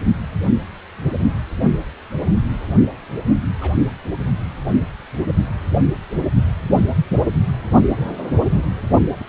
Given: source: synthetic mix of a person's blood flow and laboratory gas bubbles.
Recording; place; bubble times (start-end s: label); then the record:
Doppler ultrasound of blood flow; precordium
3.60-3.77 s: bubbles
9.18-9.25 s: bubbles
From the record:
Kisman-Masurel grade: 121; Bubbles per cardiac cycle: 1 to 2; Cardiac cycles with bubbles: 10 to 50%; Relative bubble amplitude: barely perceptible (0.100 to 0.250); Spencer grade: 2 (many but less than half of the cardiac periods contain bubble signals, singularly or in groups); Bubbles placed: only in the low amplitude regions of the cardiac cycle